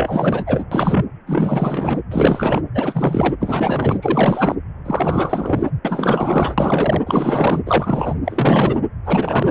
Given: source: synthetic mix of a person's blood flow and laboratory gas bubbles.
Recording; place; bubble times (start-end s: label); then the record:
Doppler ultrasound of blood flow; precordium
0.00-0.65 s: bubbles
0.72-1.05 s: bubbles
1.27-2.02 s: bubbles
2.11-2.64 s: bubbles
2.74-3.35 s: bubbles
3.41-3.99 s: bubbles
4.01-4.55 s: bubbles
4.85-5.71 s: bubbles
5.84-6.55 s: bubbles
6.58-7.03 s: bubbles
7.05-7.60 s: bubbles
7.66-8.15 s: bubbles
8.25-8.80 s: bubbles
9.05-9.51 s: bubbles
From the record:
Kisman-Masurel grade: 444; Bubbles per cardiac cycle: continuous sound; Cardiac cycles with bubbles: 100%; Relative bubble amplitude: maximal (0.775 to 0.999); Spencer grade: 4 (maximum detectable bubble signal sounding continuously throughout systole and diastole of every cardiac period, and overriding the amplitude of the normal cardiac signals); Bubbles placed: anywhere in the cardiac cycle